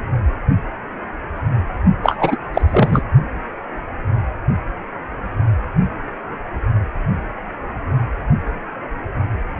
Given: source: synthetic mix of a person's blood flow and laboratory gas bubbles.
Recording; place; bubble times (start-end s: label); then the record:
Doppler ultrasound of blood flow; precordium
2.03-2.37 s: bubbles
2.54-3.03 s: bubbles
From the record:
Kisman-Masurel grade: 213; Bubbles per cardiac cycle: several, 3 to 8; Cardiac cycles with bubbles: 1 to 10%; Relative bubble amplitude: loud (0.450 to 0.775); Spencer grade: 1 (occasional bubble signal discernible with the cardiac motion signal, with majority of cardiac periods free of bubbles); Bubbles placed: only in the low amplitude regions of the cardiac cycle